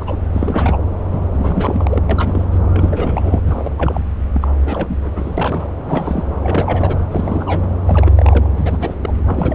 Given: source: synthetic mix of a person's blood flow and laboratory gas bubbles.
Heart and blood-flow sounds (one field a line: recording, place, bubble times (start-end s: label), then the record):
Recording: Doppler ultrasound of blood flow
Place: subclavian vein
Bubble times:
0.00-0.17 s: bubbles
0.33-0.77 s: bubbles
1.10-1.25 s: bubbles
1.31-2.03 s: bubbles
2.10-2.46 s: bubbles
2.51-2.59 s: bubbles
2.74-3.42 s: bubbles
3.44-3.71 s: bubbles
3.77-4.02 s: bubbles
4.33-4.48 s: bubbles
4.61-5.67 s: bubbles
5.84-6.23 s: bubbles
6.41-6.97 s: bubbles
7.11-7.67 s: bubbles
7.87-8.48 s: bubbles
8.57-8.96 s: bubbles
9.03-9.13 s: bubbles
9.26-9.54 s: bubbles
From the record:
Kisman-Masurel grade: 342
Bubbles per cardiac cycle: rolling drumbeat, 9 or more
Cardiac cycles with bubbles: 100%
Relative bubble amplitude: moderate (0.250 to 0.450)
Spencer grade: 3 (all of the cardiac periods contain showers or single bubble signals, but not dominating or overriding the cardiac motion signals)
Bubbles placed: anywhere in the cardiac cycle